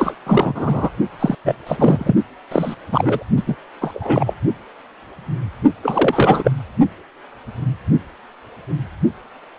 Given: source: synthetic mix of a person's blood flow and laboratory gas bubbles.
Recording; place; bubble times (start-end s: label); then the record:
Doppler ultrasound of blood flow; precordium
0.00-0.16 s: bubbles
0.26-0.89 s: bubbles
1.19-1.35 s: bubbles
1.44-1.55 s: bubbles
1.66-2.14 s: bubbles
2.51-2.75 s: bubbles
2.92-3.25 s: bubbles
3.36-3.43 s: bubbles
3.46-3.56 s: bubbles
3.80-4.33 s: bubbles
5.83-6.52 s: bubbles
From the record:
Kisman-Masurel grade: 233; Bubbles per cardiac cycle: several, 3 to 8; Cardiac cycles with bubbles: 50 to 99%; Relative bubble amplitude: loud (0.450 to 0.775); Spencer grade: 3 (all of the cardiac periods contain showers or single bubble signals, but not dominating or overriding the cardiac motion signals); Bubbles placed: only in the low amplitude regions of the cardiac cycle